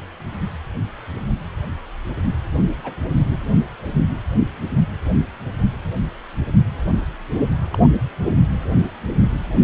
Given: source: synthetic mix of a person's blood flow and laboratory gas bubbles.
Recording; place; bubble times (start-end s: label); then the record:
Doppler ultrasound of blood flow; precordium
2.83-2.96 s: bubbles
3.30-3.39 s: bubbles
7.71-7.79 s: bubbles
From the record:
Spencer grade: 2 (many but less than half of the cardiac periods contain bubble signals, singularly or in groups); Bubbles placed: anywhere in the cardiac cycle